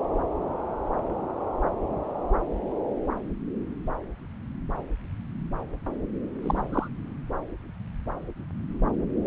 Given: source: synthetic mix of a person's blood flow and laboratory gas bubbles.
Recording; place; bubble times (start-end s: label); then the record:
Doppler ultrasound of blood flow; subclavian vein
6.42-6.60 s: bubbles
6.71-6.88 s: bubbles
From the record:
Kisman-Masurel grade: 112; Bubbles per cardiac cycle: 1 to 2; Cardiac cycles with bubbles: 1 to 10%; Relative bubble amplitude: moderate (0.250 to 0.450); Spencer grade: 1 (occasional bubble signal discernible with the cardiac motion signal, with majority of cardiac periods free of bubbles); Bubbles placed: anywhere in the cardiac cycle